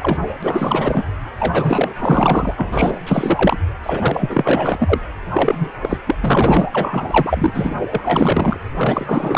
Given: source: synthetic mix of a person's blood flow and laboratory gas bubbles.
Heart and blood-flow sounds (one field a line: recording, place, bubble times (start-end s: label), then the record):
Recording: Doppler ultrasound of blood flow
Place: precordium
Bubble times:
0.00-0.17 s: bubbles
0.42-1.05 s: bubbles
1.37-1.95 s: bubbles
1.99-2.54 s: bubbles
2.57-2.99 s: bubbles
3.05-3.57 s: bubbles
3.82-4.98 s: bubbles
5.33-5.71 s: bubbles
5.81-5.97 s: bubbles
6.06-6.16 s: bubbles
6.21-6.66 s: bubbles
6.72-7.75 s: bubbles
7.90-8.01 s: bubbles
8.04-8.57 s: bubbles
8.76-9.37 s: bubbles
From the record:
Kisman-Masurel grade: 444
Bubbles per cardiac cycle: continuous sound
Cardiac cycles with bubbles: 100%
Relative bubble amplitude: maximal (0.775 to 0.999)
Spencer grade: 4 (maximum detectable bubble signal sounding continuously throughout systole and diastole of every cardiac period, and overriding the amplitude of the normal cardiac signals)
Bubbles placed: anywhere in the cardiac cycle